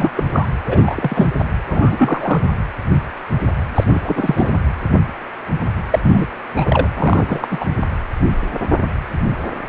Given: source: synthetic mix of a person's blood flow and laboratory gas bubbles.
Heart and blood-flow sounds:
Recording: Doppler ultrasound of blood flow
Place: precordium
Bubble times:
0.00-0.10 s: bubbles
0.17-0.24 s: bubbles
0.32-0.47 s: bubbles
0.66-1.27 s: bubbles
1.39-1.45 s: bubbles
1.71-2.40 s: bubbles
3.75-3.84 s: bubbles
3.87-4.01 s: bubbles
4.04-4.51 s: bubbles
5.90-6.00 s: bubbles
6.02-6.26 s: bubbles
6.54-6.88 s: bubbles
6.96-7.64 s: bubbles
From the record:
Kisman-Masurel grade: 233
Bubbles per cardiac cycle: several, 3 to 8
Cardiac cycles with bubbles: 50 to 99%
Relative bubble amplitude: loud (0.450 to 0.775)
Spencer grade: 3 (all of the cardiac periods contain showers or single bubble signals, but not dominating or overriding the cardiac motion signals)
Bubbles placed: anywhere in the cardiac cycle

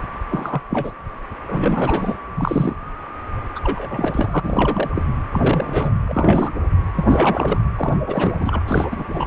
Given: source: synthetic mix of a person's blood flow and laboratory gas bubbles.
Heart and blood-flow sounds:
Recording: Doppler ultrasound of blood flow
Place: precordium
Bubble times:
0.30-0.61 s: bubbles
0.69-0.92 s: bubbles
1.48-2.18 s: bubbles
2.37-2.76 s: bubbles
3.55-3.60 s: bubbles
3.63-4.40 s: bubbles
4.43-4.90 s: bubbles
4.95-5.03 s: bubbles
5.33-5.91 s: bubbles
6.05-6.51 s: bubbles
6.96-7.58 s: bubbles
7.76-7.98 s: bubbles
8.06-8.60 s: bubbles
8.67-9.07 s: bubbles
9.12-9.27 s: bubbles
From the record:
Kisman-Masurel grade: 342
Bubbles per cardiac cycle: rolling drumbeat, 9 or more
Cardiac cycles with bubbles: 100%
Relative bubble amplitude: moderate (0.250 to 0.450)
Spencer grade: 3 (all of the cardiac periods contain showers or single bubble signals, but not dominating or overriding the cardiac motion signals)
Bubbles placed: anywhere in the cardiac cycle

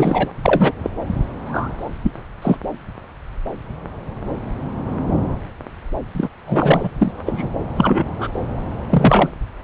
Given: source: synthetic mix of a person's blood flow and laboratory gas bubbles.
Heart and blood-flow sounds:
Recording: Doppler ultrasound of blood flow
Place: subclavian vein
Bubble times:
0.00-0.31 s: bubbles
0.43-0.73 s: bubbles
0.83-0.91 s: bubbles
1.46-1.91 s: bubbles
2.02-2.11 s: bubbles
2.42-2.56 s: bubbles
6.14-6.29 s: bubbles
6.46-6.90 s: bubbles
7.00-7.12 s: bubbles
7.26-7.49 s: bubbles
7.76-8.04 s: bubbles
8.18-8.28 s: bubbles
8.89-9.30 s: bubbles
From the record:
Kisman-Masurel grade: 233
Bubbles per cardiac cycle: several, 3 to 8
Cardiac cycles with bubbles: 50 to 99%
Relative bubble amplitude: loud (0.450 to 0.775)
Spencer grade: 3 (all of the cardiac periods contain showers or single bubble signals, but not dominating or overriding the cardiac motion signals)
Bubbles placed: anywhere in the cardiac cycle

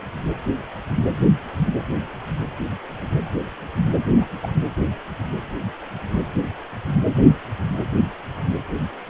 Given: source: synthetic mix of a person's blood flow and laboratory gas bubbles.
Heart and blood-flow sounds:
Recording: Doppler ultrasound of blood flow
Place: precordium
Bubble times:
4.15-4.27 s: bubbles
4.42-4.50 s: bubbles
From the record:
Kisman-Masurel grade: 221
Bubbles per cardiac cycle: several, 3 to 8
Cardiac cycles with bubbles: 10 to 50%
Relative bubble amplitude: barely perceptible (0.100 to 0.250)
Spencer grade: 2 (many but less than half of the cardiac periods contain bubble signals, singularly or in groups)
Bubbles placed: anywhere in the cardiac cycle

